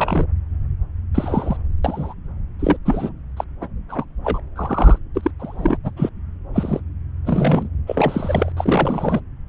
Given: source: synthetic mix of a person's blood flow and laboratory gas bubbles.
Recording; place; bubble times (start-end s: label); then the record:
Doppler ultrasound of blood flow; subclavian vein
0.00-0.26 s: bubbles
1.14-1.57 s: bubbles
1.84-2.14 s: bubbles
2.59-2.76 s: bubbles
2.85-3.12 s: bubbles
3.36-3.44 s: bubbles
3.60-3.67 s: bubbles
3.88-4.04 s: bubbles
4.24-4.40 s: bubbles
4.55-4.98 s: bubbles
5.15-5.31 s: bubbles
5.39-5.77 s: bubbles
5.83-5.91 s: bubbles
5.96-6.09 s: bubbles
6.54-6.80 s: bubbles
7.25-7.69 s: bubbles
7.86-8.52 s: bubbles
8.57-9.20 s: bubbles
From the record:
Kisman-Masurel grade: 233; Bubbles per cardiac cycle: several, 3 to 8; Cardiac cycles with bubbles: 50 to 99%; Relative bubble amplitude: loud (0.450 to 0.775); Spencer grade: 3 (all of the cardiac periods contain showers or single bubble signals, but not dominating or overriding the cardiac motion signals); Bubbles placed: anywhere in the cardiac cycle